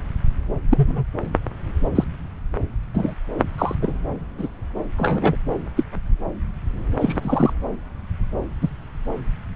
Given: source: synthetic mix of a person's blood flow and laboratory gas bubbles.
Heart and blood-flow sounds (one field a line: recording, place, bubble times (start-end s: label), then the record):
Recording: Doppler ultrasound of blood flow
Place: subclavian vein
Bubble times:
0.70-1.04 s: bubbles
1.95-2.04 s: bubbles
2.94-3.15 s: bubbles
3.58-3.75 s: bubbles
3.82-3.94 s: bubbles
4.38-4.49 s: bubbles
4.97-5.37 s: bubbles
5.76-5.83 s: bubbles
7.00-7.53 s: bubbles
8.62-8.69 s: bubbles
From the record:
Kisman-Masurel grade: 123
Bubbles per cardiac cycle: 1 to 2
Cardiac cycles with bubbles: 10 to 50%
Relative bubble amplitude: loud (0.450 to 0.775)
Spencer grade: 2 (many but less than half of the cardiac periods contain bubble signals, singularly or in groups)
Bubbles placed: anywhere in the cardiac cycle